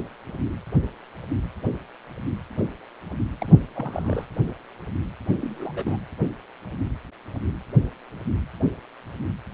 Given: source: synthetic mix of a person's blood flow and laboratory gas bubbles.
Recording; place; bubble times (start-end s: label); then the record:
Doppler ultrasound of blood flow; precordium
3.40-3.57 s: bubbles
3.75-4.24 s: bubbles
5.41-5.97 s: bubbles
From the record:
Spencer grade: 2 (many but less than half of the cardiac periods contain bubble signals, singularly or in groups); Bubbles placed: anywhere in the cardiac cycle